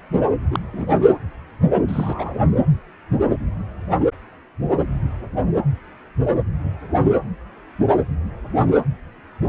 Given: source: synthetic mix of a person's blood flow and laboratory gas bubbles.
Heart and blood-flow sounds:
Doppler ultrasound of blood flow; precordium
0.51-0.59 s: bubbles
0.73-0.85 s: bubbles
0.89-0.97 s: bubbles
1.88-2.43 s: bubbles
From the record:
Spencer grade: 1 (occasional bubble signal discernible with the cardiac motion signal, with majority of cardiac periods free of bubbles); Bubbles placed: anywhere in the cardiac cycle

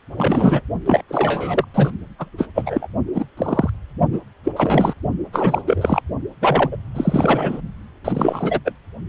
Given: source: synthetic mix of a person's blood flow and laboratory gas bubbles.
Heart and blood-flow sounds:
Doppler ultrasound of blood flow; precordium
0.17-0.61 s: bubbles
0.86-1.02 s: bubbles
1.08-1.65 s: bubbles
1.74-1.90 s: bubbles
2.19-2.30 s: bubbles
2.38-2.48 s: bubbles
2.54-2.88 s: bubbles
3.14-3.25 s: bubbles
3.37-3.70 s: bubbles
4.12-4.20 s: bubbles
4.44-4.52 s: bubbles
4.56-4.93 s: bubbles
5.33-5.62 s: bubbles
5.67-6.01 s: bubbles
6.41-6.77 s: bubbles
6.95-7.61 s: bubbles
8.04-8.60 s: bubbles
8.65-8.73 s: bubbles
From the record:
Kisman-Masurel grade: 343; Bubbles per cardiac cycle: rolling drumbeat, 9 or more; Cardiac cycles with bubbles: 100%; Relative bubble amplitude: loud (0.450 to 0.775); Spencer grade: 3 (all of the cardiac periods contain showers or single bubble signals, but not dominating or overriding the cardiac motion signals); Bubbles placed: only in the low amplitude regions of the cardiac cycle

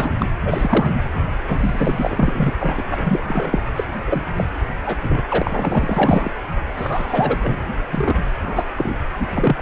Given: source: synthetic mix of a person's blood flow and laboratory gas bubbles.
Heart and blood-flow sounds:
Doppler ultrasound of blood flow; precordium
0.00-0.15 s: bubbles
0.20-0.28 s: bubbles
0.45-0.97 s: bubbles
1.48-2.53 s: bubbles
2.59-2.83 s: bubbles
2.91-3.62 s: bubbles
3.75-3.84 s: bubbles
4.07-4.25 s: bubbles
4.36-4.44 s: bubbles
4.84-5.04 s: bubbles
5.08-5.24 s: bubbles
5.29-6.31 s: bubbles
6.77-7.38 s: bubbles
7.43-7.68 s: bubbles
7.91-8.14 s: bubbles
8.42-8.63 s: bubbles
8.77-8.96 s: bubbles
9.18-9.62 s: bubbles
From the record:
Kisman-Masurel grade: 243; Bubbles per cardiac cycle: several, 3 to 8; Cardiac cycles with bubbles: 100%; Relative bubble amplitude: loud (0.450 to 0.775); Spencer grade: 3 (all of the cardiac periods contain showers or single bubble signals, but not dominating or overriding the cardiac motion signals); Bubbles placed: anywhere in the cardiac cycle

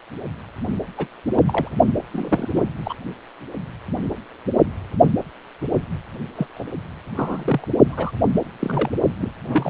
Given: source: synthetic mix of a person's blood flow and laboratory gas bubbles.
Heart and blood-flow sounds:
Doppler ultrasound of blood flow; precordium
0.98-1.07 s: bubbles
1.34-1.43 s: bubbles
1.46-1.70 s: bubbles
2.11-2.48 s: bubbles
2.52-2.64 s: bubbles
2.84-2.94 s: bubbles
6.36-6.47 s: bubbles
6.55-6.63 s: bubbles
7.16-7.68 s: bubbles
7.89-8.12 s: bubbles
8.35-8.40 s: bubbles
8.59-8.90 s: bubbles
9.21-9.32 s: bubbles
9.47-9.70 s: bubbles
From the record:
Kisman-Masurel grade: 232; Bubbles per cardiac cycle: several, 3 to 8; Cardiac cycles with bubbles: 50 to 99%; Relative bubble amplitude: moderate (0.250 to 0.450); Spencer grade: 3 (all of the cardiac periods contain showers or single bubble signals, but not dominating or overriding the cardiac motion signals); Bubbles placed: only in the low amplitude regions of the cardiac cycle

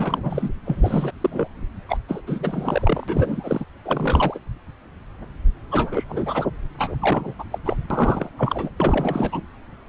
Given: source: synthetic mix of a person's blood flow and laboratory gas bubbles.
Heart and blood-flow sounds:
Doppler ultrasound of blood flow; subclavian vein
0.00-0.49 s: bubbles
0.66-1.11 s: bubbles
1.21-1.47 s: bubbles
1.89-1.97 s: bubbles
2.09-2.22 s: bubbles
2.27-3.65 s: bubbles
3.85-4.39 s: bubbles
5.71-6.04 s: bubbles
6.08-6.48 s: bubbles
6.77-6.96 s: bubbles
7.00-7.33 s: bubbles
7.38-7.44 s: bubbles
7.51-7.58 s: bubbles
7.65-7.76 s: bubbles
7.90-8.29 s: bubbles
8.38-8.71 s: bubbles
8.77-9.41 s: bubbles
From the record:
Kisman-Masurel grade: 342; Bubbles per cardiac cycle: rolling drumbeat, 9 or more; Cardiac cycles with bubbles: 100%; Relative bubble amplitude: moderate (0.250 to 0.450); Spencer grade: 3 (all of the cardiac periods contain showers or single bubble signals, but not dominating or overriding the cardiac motion signals); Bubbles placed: anywhere in the cardiac cycle

